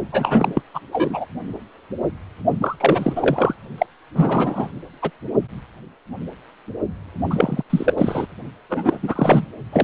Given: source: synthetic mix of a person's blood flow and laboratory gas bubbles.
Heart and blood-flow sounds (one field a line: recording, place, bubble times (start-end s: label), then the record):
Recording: Doppler ultrasound of blood flow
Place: precordium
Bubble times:
0.12-0.62 s: bubbles
0.73-0.80 s: bubbles
0.92-1.26 s: bubbles
2.61-2.76 s: bubbles
2.80-3.13 s: bubbles
3.15-3.56 s: bubbles
3.78-3.86 s: bubbles
4.14-4.70 s: bubbles
5.02-5.11 s: bubbles
7.30-7.63 s: bubbles
7.70-7.94 s: bubbles
7.98-8.27 s: bubbles
8.70-8.99 s: bubbles
9.02-9.46 s: bubbles
9.72-9.84 s: bubbles
From the record:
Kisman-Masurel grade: 333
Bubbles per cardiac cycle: rolling drumbeat, 9 or more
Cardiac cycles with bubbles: 50 to 99%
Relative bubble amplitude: loud (0.450 to 0.775)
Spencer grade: 3 (all of the cardiac periods contain showers or single bubble signals, but not dominating or overriding the cardiac motion signals)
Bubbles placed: only in the low amplitude regions of the cardiac cycle